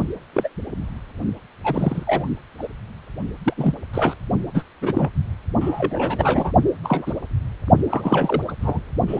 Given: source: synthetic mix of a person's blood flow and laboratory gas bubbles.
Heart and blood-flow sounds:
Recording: Doppler ultrasound of blood flow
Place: precordium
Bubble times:
0.33-0.48 s: bubbles
1.64-2.04 s: bubbles
2.07-2.28 s: bubbles
2.58-2.68 s: bubbles
3.43-3.53 s: bubbles
3.57-3.74 s: bubbles
3.94-4.15 s: bubbles
4.54-4.63 s: bubbles
4.81-5.10 s: bubbles
5.61-6.52 s: bubbles
6.83-7.12 s: bubbles
7.89-8.44 s: bubbles
8.48-8.53 s: bubbles
8.61-8.80 s: bubbles
9.07-9.20 s: bubbles
From the record:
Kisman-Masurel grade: 242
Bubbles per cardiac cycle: several, 3 to 8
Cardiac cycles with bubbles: 100%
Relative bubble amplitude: moderate (0.250 to 0.450)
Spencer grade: 3 (all of the cardiac periods contain showers or single bubble signals, but not dominating or overriding the cardiac motion signals)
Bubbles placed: only in the low amplitude regions of the cardiac cycle

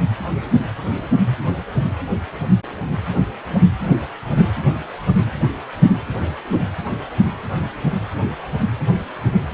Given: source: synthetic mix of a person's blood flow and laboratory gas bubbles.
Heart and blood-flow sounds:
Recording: Doppler ultrasound of blood flow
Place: precordium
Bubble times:
4.36-4.45 s: bubbles
From the record:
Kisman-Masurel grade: 111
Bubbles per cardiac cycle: 1 to 2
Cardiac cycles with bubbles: 1 to 10%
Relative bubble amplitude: barely perceptible (0.100 to 0.250)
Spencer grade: 1 (occasional bubble signal discernible with the cardiac motion signal, with majority of cardiac periods free of bubbles)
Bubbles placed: anywhere in the cardiac cycle

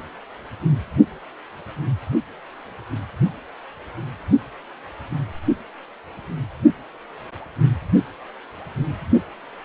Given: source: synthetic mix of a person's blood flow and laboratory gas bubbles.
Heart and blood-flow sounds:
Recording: Doppler ultrasound of blood flow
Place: precordium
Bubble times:
no bubbles
From the record:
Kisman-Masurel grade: 000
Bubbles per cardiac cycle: 0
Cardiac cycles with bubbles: 0%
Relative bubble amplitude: no bubbles discernible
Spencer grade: 0 (complete lack of bubble signals)

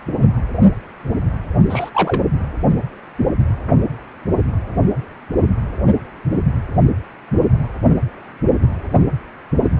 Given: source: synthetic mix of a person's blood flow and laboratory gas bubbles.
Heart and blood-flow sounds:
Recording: Doppler ultrasound of blood flow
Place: precordium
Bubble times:
1.69-1.90 s: bubbles
1.94-2.23 s: bubbles
From the record:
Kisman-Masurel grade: 212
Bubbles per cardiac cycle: several, 3 to 8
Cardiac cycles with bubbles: 1 to 10%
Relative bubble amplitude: moderate (0.250 to 0.450)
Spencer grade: 1 (occasional bubble signal discernible with the cardiac motion signal, with majority of cardiac periods free of bubbles)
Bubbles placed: only in the low amplitude regions of the cardiac cycle

